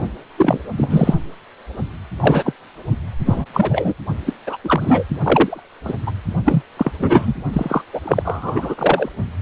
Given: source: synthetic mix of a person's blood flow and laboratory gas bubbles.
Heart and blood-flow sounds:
Doppler ultrasound of blood flow; precordium
0.37-0.59 s: bubbles
0.77-1.15 s: bubbles
2.20-2.53 s: bubbles
3.26-3.46 s: bubbles
3.53-3.94 s: bubbles
4.26-4.33 s: bubbles
4.46-4.57 s: bubbles
4.64-5.04 s: bubbles
5.22-5.63 s: bubbles
5.84-5.93 s: bubbles
6.06-6.11 s: bubbles
6.44-6.62 s: bubbles
6.77-6.91 s: bubbles
6.98-7.34 s: bubbles
7.52-7.82 s: bubbles
7.93-8.01 s: bubbles
8.04-8.75 s: bubbles
8.78-9.09 s: bubbles
From the record:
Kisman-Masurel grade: 243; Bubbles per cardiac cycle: several, 3 to 8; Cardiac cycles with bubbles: 100%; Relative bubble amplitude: loud (0.450 to 0.775); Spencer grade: 3 (all of the cardiac periods contain showers or single bubble signals, but not dominating or overriding the cardiac motion signals); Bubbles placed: only in the low amplitude regions of the cardiac cycle

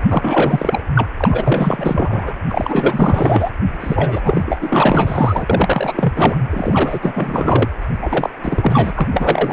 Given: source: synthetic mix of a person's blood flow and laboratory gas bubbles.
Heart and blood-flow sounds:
Doppler ultrasound of blood flow; precordium
0.10-0.83 s: bubbles
0.95-1.06 s: bubbles
1.17-2.35 s: bubbles
2.48-3.50 s: bubbles
3.80-4.58 s: bubbles
4.61-5.46 s: bubbles
5.50-6.37 s: bubbles
6.50-6.99 s: bubbles
7.02-7.69 s: bubbles
8.01-8.30 s: bubbles
8.42-8.91 s: bubbles
8.96-9.09 s: bubbles
9.12-9.53 s: bubbles
From the record:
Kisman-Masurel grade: 444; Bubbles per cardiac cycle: continuous sound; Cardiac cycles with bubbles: 100%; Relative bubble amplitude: maximal (0.775 to 0.999); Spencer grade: 4 (maximum detectable bubble signal sounding continuously throughout systole and diastole of every cardiac period, and overriding the amplitude of the normal cardiac signals); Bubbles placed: anywhere in the cardiac cycle

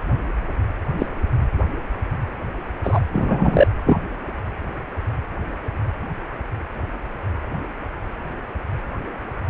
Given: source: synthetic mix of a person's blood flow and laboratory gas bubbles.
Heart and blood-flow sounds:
Doppler ultrasound of blood flow; precordium
0.98-1.06 s: bubbles
2.83-3.00 s: bubbles
3.11-3.67 s: bubbles
3.85-4.00 s: bubbles
From the record:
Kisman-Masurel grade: 123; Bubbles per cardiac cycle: 1 to 2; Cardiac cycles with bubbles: 10 to 50%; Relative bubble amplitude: loud (0.450 to 0.775); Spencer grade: 2 (many but less than half of the cardiac periods contain bubble signals, singularly or in groups); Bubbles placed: anywhere in the cardiac cycle

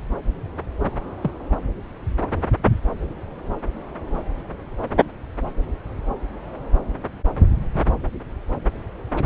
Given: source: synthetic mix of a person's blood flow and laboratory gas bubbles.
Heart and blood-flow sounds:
Doppler ultrasound of blood flow; subclavian vein
1.21-1.31 s: bubbles
From the record:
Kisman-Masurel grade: 111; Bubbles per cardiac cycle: 1 to 2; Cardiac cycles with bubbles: 1 to 10%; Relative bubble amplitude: barely perceptible (0.100 to 0.250); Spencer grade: 1 (occasional bubble signal discernible with the cardiac motion signal, with majority of cardiac periods free of bubbles); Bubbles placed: anywhere in the cardiac cycle

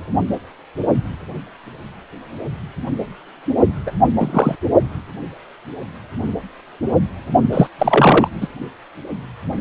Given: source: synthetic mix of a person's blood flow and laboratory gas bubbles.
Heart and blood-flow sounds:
Doppler ultrasound of blood flow; precordium
3.87-3.91 s: bubbles
4.19-4.55 s: bubbles
7.53-7.67 s: bubbles
7.79-8.28 s: bubbles
8.41-8.48 s: bubbles
From the record:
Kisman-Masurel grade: 223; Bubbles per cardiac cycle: several, 3 to 8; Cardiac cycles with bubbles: 10 to 50%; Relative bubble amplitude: loud (0.450 to 0.775); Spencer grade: 2 (many but less than half of the cardiac periods contain bubble signals, singularly or in groups); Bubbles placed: only in the low amplitude regions of the cardiac cycle

